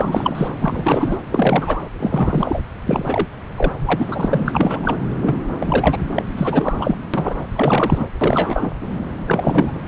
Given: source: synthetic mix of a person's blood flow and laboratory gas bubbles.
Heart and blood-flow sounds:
Doppler ultrasound of blood flow; subclavian vein
0.00-0.48 s: bubbles
0.58-1.18 s: bubbles
1.31-1.82 s: bubbles
1.99-2.61 s: bubbles
2.85-3.27 s: bubbles
3.56-3.73 s: bubbles
3.78-4.79 s: bubbles
4.82-4.96 s: bubbles
5.21-5.42 s: bubbles
5.59-6.00 s: bubbles
6.16-6.25 s: bubbles
6.37-6.96 s: bubbles
7.13-7.37 s: bubbles
7.55-8.09 s: bubbles
8.21-8.71 s: bubbles
9.27-9.84 s: bubbles
From the record:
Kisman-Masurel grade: 343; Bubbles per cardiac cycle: rolling drumbeat, 9 or more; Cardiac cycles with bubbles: 100%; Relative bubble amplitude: loud (0.450 to 0.775); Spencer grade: 3 (all of the cardiac periods contain showers or single bubble signals, but not dominating or overriding the cardiac motion signals); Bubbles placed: anywhere in the cardiac cycle

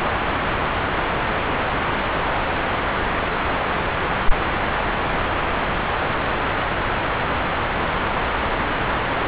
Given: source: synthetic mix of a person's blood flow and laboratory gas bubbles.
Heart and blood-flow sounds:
Doppler ultrasound of blood flow; subclavian vein
no bubbles
From the record:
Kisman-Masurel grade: 000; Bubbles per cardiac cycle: 0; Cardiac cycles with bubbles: 0%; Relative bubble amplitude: no bubbles discernible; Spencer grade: 0 (complete lack of bubble signals)

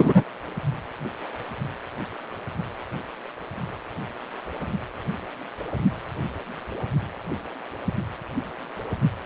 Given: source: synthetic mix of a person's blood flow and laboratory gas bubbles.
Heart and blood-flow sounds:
Doppler ultrasound of blood flow; precordium
0.00-0.24 s: bubbles
From the record:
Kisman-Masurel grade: 213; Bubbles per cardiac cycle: several, 3 to 8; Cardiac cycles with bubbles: 1 to 10%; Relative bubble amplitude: loud (0.450 to 0.775); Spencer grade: 1 (occasional bubble signal discernible with the cardiac motion signal, with majority of cardiac periods free of bubbles); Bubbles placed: anywhere in the cardiac cycle

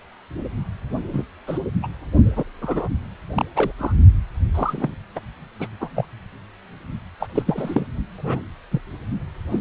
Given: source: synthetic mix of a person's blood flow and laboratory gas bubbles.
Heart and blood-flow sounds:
Doppler ultrasound of blood flow; precordium
1.12-1.25 s: bubbles
1.47-1.59 s: bubbles
1.82-1.87 s: bubbles
2.35-2.44 s: bubbles
2.61-2.88 s: bubbles
3.33-3.45 s: bubbles
3.55-3.72 s: bubbles
3.79-3.93 s: bubbles
4.54-4.95 s: bubbles
5.15-5.21 s: bubbles
5.59-5.67 s: bubbles
5.80-5.90 s: bubbles
5.95-6.05 s: bubbles
7.20-7.26 s: bubbles
7.34-7.43 s: bubbles
7.46-7.86 s: bubbles
8.18-8.43 s: bubbles
8.71-8.81 s: bubbles
9.51-9.59 s: bubbles
From the record:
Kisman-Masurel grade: 232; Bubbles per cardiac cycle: several, 3 to 8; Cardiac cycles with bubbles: 50 to 99%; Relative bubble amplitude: moderate (0.250 to 0.450); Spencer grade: 3 (all of the cardiac periods contain showers or single bubble signals, but not dominating or overriding the cardiac motion signals); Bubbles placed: only in the low amplitude regions of the cardiac cycle

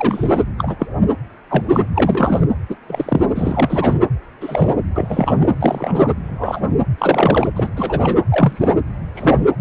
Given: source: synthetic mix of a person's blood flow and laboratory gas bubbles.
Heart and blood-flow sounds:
Doppler ultrasound of blood flow; precordium
0.00-0.43 s: bubbles
0.58-0.75 s: bubbles
0.79-0.86 s: bubbles
1.48-1.89 s: bubbles
1.95-2.46 s: bubbles
2.69-2.75 s: bubbles
2.87-3.21 s: bubbles
3.34-3.99 s: bubbles
4.41-4.74 s: bubbles
4.96-5.55 s: bubbles
5.60-6.14 s: bubbles
6.25-6.61 s: bubbles
6.98-7.48 s: bubbles
7.56-7.71 s: bubbles
7.76-8.16 s: bubbles
8.29-8.73 s: bubbles
9.14-9.46 s: bubbles
From the record:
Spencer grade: 3 (all of the cardiac periods contain showers or single bubble signals, but not dominating or overriding the cardiac motion signals); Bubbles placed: anywhere in the cardiac cycle

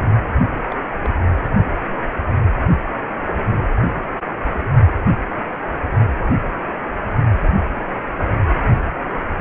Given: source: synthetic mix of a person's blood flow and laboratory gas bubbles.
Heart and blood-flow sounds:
Doppler ultrasound of blood flow; precordium
0.54-0.76 s: bubbles
1.04-1.08 s: bubbles
From the record:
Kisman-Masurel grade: 221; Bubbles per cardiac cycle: several, 3 to 8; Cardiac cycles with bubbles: 10 to 50%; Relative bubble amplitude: barely perceptible (0.100 to 0.250); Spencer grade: 2 (many but less than half of the cardiac periods contain bubble signals, singularly or in groups); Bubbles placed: anywhere in the cardiac cycle

